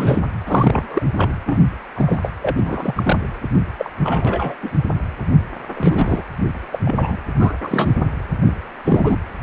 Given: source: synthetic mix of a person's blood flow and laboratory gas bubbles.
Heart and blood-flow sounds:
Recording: Doppler ultrasound of blood flow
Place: precordium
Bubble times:
0.00-0.21 s: bubbles
0.46-1.02 s: bubbles
1.16-1.33 s: bubbles
1.46-1.60 s: bubbles
1.96-2.19 s: bubbles
2.23-2.31 s: bubbles
2.42-3.17 s: bubbles
3.78-3.90 s: bubbles
4.03-4.54 s: bubbles
4.62-4.70 s: bubbles
5.74-6.25 s: bubbles
6.72-6.79 s: bubbles
6.84-7.16 s: bubbles
7.39-7.54 s: bubbles
7.62-7.92 s: bubbles
8.42-8.55 s: bubbles
8.85-9.17 s: bubbles
From the record:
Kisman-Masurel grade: 243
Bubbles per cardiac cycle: several, 3 to 8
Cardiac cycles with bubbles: 100%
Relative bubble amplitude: loud (0.450 to 0.775)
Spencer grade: 3 (all of the cardiac periods contain showers or single bubble signals, but not dominating or overriding the cardiac motion signals)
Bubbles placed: anywhere in the cardiac cycle

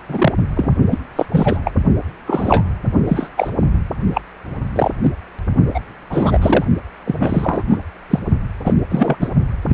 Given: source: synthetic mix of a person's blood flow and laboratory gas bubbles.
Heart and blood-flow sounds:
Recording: Doppler ultrasound of blood flow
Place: precordium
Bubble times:
0.08-0.32 s: bubbles
0.55-0.75 s: bubbles
0.91-0.98 s: bubbles
1.16-1.26 s: bubbles
1.31-1.60 s: bubbles
1.65-1.71 s: bubbles
2.26-2.64 s: bubbles
3.08-3.29 s: bubbles
3.37-3.50 s: bubbles
4.14-4.21 s: bubbles
4.75-4.91 s: bubbles
5.02-5.10 s: bubbles
5.74-5.80 s: bubbles
6.09-6.64 s: bubbles
7.06-7.63 s: bubbles
7.69-7.78 s: bubbles
8.10-8.20 s: bubbles
8.64-8.73 s: bubbles
8.90-9.17 s: bubbles
9.20-9.29 s: bubbles
9.69-9.74 s: bubbles
From the record:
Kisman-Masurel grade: 243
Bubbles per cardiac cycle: several, 3 to 8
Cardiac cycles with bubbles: 100%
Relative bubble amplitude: loud (0.450 to 0.775)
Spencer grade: 3 (all of the cardiac periods contain showers or single bubble signals, but not dominating or overriding the cardiac motion signals)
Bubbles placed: only in the low amplitude regions of the cardiac cycle

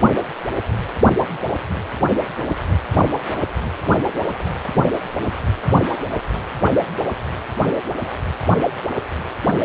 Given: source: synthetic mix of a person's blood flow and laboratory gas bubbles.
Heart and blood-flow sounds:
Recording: Doppler ultrasound of blood flow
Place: precordium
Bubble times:
4.77-4.83 s: bubbles
From the record:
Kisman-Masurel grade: 113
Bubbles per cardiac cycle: 1 to 2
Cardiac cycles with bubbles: 1 to 10%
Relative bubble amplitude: loud (0.450 to 0.775)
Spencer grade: 1 (occasional bubble signal discernible with the cardiac motion signal, with majority of cardiac periods free of bubbles)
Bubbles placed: anywhere in the cardiac cycle

